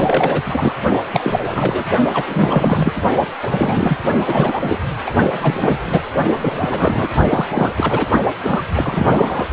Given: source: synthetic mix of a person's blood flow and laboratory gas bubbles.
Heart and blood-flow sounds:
Doppler ultrasound of blood flow; precordium
0.00-0.42 s: bubbles
0.45-0.74 s: bubbles
1.12-1.84 s: bubbles
2.13-2.92 s: bubbles
3.42-3.46 s: bubbles
3.52-3.98 s: bubbles
4.26-4.77 s: bubbles
5.06-5.13 s: bubbles
5.41-5.80 s: bubbles
5.85-6.01 s: bubbles
6.36-7.12 s: bubbles
7.29-7.47 s: bubbles
7.50-8.07 s: bubbles
8.43-8.64 s: bubbles
8.75-9.45 s: bubbles
9.51-9.53 s: bubbles
From the record:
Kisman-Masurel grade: 343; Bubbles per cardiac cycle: rolling drumbeat, 9 or more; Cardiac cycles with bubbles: 100%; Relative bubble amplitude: loud (0.450 to 0.775); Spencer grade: 3 (all of the cardiac periods contain showers or single bubble signals, but not dominating or overriding the cardiac motion signals); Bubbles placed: only in the low amplitude regions of the cardiac cycle

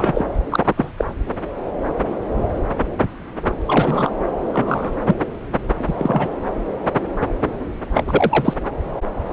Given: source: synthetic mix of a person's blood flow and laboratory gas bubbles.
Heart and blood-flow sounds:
Doppler ultrasound of blood flow; subclavian vein
0.00-0.24 s: bubbles
0.50-0.74 s: bubbles
0.76-0.92 s: bubbles
0.98-1.05 s: bubbles
3.67-4.10 s: bubbles
4.52-4.96 s: bubbles
5.05-5.16 s: bubbles
5.79-5.94 s: bubbles
5.97-6.30 s: bubbles
7.93-8.04 s: bubbles
8.07-8.54 s: bubbles
From the record:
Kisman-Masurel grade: 223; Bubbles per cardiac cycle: several, 3 to 8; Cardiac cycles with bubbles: 10 to 50%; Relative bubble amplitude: loud (0.450 to 0.775); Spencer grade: 2 (many but less than half of the cardiac periods contain bubble signals, singularly or in groups); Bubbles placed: anywhere in the cardiac cycle

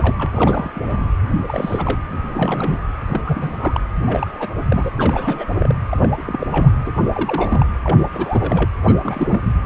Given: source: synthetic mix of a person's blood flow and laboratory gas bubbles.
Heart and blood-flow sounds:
Doppler ultrasound of blood flow; precordium
0.00-0.70 s: bubbles
0.74-1.11 s: bubbles
1.47-1.99 s: bubbles
2.08-2.80 s: bubbles
3.07-3.21 s: bubbles
3.26-3.81 s: bubbles
4.05-4.27 s: bubbles
4.39-4.50 s: bubbles
4.56-4.63 s: bubbles
4.68-4.91 s: bubbles
4.97-5.51 s: bubbles
5.55-5.73 s: bubbles
5.89-6.09 s: bubbles
6.17-6.23 s: bubbles
6.26-6.47 s: bubbles
6.51-6.75 s: bubbles
6.85-6.92 s: bubbles
7.12-7.66 s: bubbles
7.83-7.98 s: bubbles
8.12-8.70 s: bubbles
8.86-8.95 s: bubbles
8.99-9.41 s: bubbles
From the record:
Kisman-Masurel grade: 342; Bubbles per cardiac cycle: rolling drumbeat, 9 or more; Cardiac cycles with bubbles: 100%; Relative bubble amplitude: moderate (0.250 to 0.450); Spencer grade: 3 (all of the cardiac periods contain showers or single bubble signals, but not dominating or overriding the cardiac motion signals); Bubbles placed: anywhere in the cardiac cycle

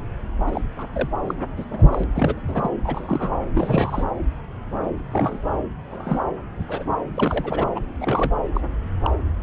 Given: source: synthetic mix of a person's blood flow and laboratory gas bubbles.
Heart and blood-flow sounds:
Doppler ultrasound of blood flow; subclavian vein
0.46-0.61 s: bubbles
0.77-0.84 s: bubbles
0.94-1.09 s: bubbles
1.28-1.34 s: bubbles
1.57-1.65 s: bubbles
1.71-1.84 s: bubbles
1.92-2.04 s: bubbles
2.15-2.41 s: bubbles
2.48-2.70 s: bubbles
2.84-3.31 s: bubbles
3.54-4.04 s: bubbles
5.11-5.39 s: bubbles
5.91-6.21 s: bubbles
6.67-6.85 s: bubbles
7.14-7.64 s: bubbles
7.75-7.84 s: bubbles
8.00-8.32 s: bubbles
8.54-8.61 s: bubbles
9.02-9.17 s: bubbles
From the record:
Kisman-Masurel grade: 232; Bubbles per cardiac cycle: several, 3 to 8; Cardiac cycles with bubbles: 50 to 99%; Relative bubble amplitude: moderate (0.250 to 0.450); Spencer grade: 3 (all of the cardiac periods contain showers or single bubble signals, but not dominating or overriding the cardiac motion signals); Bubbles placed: anywhere in the cardiac cycle

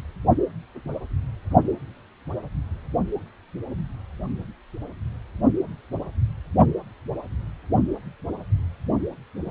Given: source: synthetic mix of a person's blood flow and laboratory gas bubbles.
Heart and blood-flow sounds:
Doppler ultrasound of blood flow; precordium
9.46-9.51 s: bubbles
From the record:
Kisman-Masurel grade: 111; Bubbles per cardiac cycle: 1 to 2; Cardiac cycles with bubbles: 1 to 10%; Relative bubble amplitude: barely perceptible (0.100 to 0.250); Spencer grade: 1 (occasional bubble signal discernible with the cardiac motion signal, with majority of cardiac periods free of bubbles); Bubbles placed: only in the low amplitude regions of the cardiac cycle

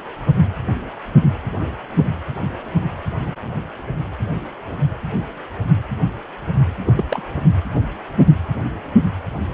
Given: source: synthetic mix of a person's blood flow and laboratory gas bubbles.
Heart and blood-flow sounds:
Doppler ultrasound of blood flow; precordium
6.86-6.93 s: bubbles
6.96-7.05 s: bubbles
7.11-7.23 s: bubbles
From the record:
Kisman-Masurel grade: 212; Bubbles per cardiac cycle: several, 3 to 8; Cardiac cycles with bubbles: 1 to 10%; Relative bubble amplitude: moderate (0.250 to 0.450); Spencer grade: 1 (occasional bubble signal discernible with the cardiac motion signal, with majority of cardiac periods free of bubbles); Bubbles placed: anywhere in the cardiac cycle

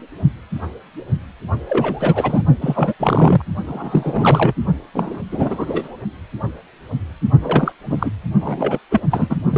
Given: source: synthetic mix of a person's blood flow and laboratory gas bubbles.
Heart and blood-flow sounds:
Doppler ultrasound of blood flow; precordium
1.69-2.43 s: bubbles
2.61-2.94 s: bubbles
2.99-3.42 s: bubbles
3.66-4.54 s: bubbles
4.94-5.21 s: bubbles
5.32-5.92 s: bubbles
7.41-7.72 s: bubbles
7.85-8.12 s: bubbles
8.40-8.78 s: bubbles
8.91-9.00 s: bubbles
9.10-9.36 s: bubbles
9.49-9.58 s: bubbles
From the record:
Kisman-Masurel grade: 333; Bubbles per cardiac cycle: rolling drumbeat, 9 or more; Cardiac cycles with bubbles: 50 to 99%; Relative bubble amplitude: loud (0.450 to 0.775); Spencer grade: 3 (all of the cardiac periods contain showers or single bubble signals, but not dominating or overriding the cardiac motion signals); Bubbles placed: only in the low amplitude regions of the cardiac cycle

